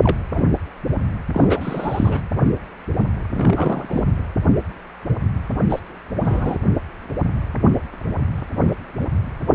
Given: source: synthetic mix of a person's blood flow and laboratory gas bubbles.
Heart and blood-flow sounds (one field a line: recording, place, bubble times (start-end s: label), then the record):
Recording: Doppler ultrasound of blood flow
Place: precordium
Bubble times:
0.02-0.17 s: bubbles
0.33-0.49 s: bubbles
1.33-2.21 s: bubbles
3.33-4.05 s: bubbles
5.67-5.81 s: bubbles
6.15-6.57 s: bubbles
From the record:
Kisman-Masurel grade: 232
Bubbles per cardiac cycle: several, 3 to 8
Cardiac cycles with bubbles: 50 to 99%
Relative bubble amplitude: moderate (0.250 to 0.450)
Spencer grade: 3 (all of the cardiac periods contain showers or single bubble signals, but not dominating or overriding the cardiac motion signals)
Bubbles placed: anywhere in the cardiac cycle